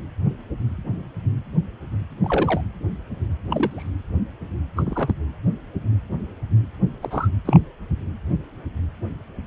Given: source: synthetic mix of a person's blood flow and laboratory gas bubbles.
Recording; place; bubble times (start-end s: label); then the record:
Doppler ultrasound of blood flow; precordium
2.23-2.61 s: bubbles
3.50-3.89 s: bubbles
4.76-5.14 s: bubbles
7.02-7.29 s: bubbles
7.45-7.60 s: bubbles
From the record:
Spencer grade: 2 (many but less than half of the cardiac periods contain bubble signals, singularly or in groups); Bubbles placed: anywhere in the cardiac cycle